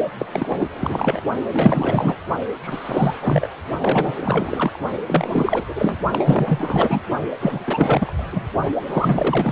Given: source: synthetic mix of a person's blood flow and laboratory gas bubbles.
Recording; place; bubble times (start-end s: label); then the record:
Doppler ultrasound of blood flow; precordium
0.19-0.26 s: bubbles
0.32-0.69 s: bubbles
0.79-1.21 s: bubbles
1.53-2.17 s: bubbles
2.62-3.17 s: bubbles
3.20-3.48 s: bubbles
3.80-4.16 s: bubbles
4.21-4.79 s: bubbles
5.06-5.65 s: bubbles
5.68-5.97 s: bubbles
6.12-7.01 s: bubbles
7.40-8.23 s: bubbles
8.31-8.46 s: bubbles
8.86-9.52 s: bubbles
From the record:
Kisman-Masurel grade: 444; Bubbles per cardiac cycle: continuous sound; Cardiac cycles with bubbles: 100%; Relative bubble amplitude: maximal (0.775 to 0.999); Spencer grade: 4 (maximum detectable bubble signal sounding continuously throughout systole and diastole of every cardiac period, and overriding the amplitude of the normal cardiac signals); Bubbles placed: only in the low amplitude regions of the cardiac cycle